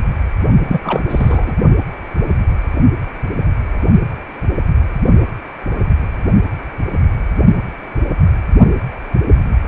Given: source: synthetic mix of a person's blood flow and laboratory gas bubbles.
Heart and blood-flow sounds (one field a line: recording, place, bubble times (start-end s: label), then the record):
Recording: Doppler ultrasound of blood flow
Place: precordium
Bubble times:
0.66-0.80 s: bubbles
0.83-1.03 s: bubbles
1.09-1.54 s: bubbles
From the record:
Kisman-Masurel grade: 212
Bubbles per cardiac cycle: several, 3 to 8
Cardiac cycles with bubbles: 1 to 10%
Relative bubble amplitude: moderate (0.250 to 0.450)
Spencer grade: 1 (occasional bubble signal discernible with the cardiac motion signal, with majority of cardiac periods free of bubbles)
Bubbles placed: only in the low amplitude regions of the cardiac cycle